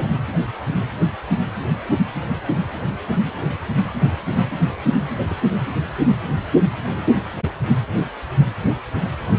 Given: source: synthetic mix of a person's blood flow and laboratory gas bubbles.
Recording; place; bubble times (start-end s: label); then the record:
Doppler ultrasound of blood flow; precordium
0.00-0.15 s: bubbles
5.14-5.26 s: bubbles
5.29-5.34 s: bubbles
From the record:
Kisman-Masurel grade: 221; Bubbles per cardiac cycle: several, 3 to 8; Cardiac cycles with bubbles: 10 to 50%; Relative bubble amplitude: barely perceptible (0.100 to 0.250); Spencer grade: 2 (many but less than half of the cardiac periods contain bubble signals, singularly or in groups); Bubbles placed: anywhere in the cardiac cycle